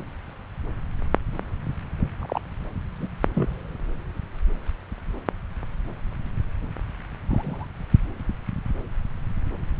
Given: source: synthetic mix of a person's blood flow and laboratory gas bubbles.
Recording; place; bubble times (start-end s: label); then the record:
Doppler ultrasound of blood flow; subclavian vein
2.19-2.41 s: bubbles
2.98-3.07 s: bubbles
3.34-3.49 s: bubbles
7.28-7.67 s: bubbles
From the record:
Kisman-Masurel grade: 121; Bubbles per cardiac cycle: 1 to 2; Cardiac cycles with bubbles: 10 to 50%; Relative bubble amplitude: barely perceptible (0.100 to 0.250); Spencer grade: 2 (many but less than half of the cardiac periods contain bubble signals, singularly or in groups); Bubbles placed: anywhere in the cardiac cycle